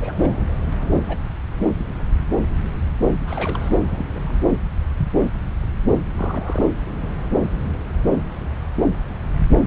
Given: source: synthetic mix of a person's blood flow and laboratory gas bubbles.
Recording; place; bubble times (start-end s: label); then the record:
Doppler ultrasound of blood flow; subclavian vein
0.02-0.47 s: bubbles
0.80-1.17 s: bubbles
1.59-1.72 s: bubbles
3.21-3.71 s: bubbles
3.85-4.05 s: bubbles
4.14-4.35 s: bubbles
6.17-6.66 s: bubbles
9.56-9.62 s: bubbles
From the record:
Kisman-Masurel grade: 221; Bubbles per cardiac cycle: several, 3 to 8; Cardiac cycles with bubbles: 10 to 50%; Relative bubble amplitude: barely perceptible (0.100 to 0.250); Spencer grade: 2 (many but less than half of the cardiac periods contain bubble signals, singularly or in groups); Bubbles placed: anywhere in the cardiac cycle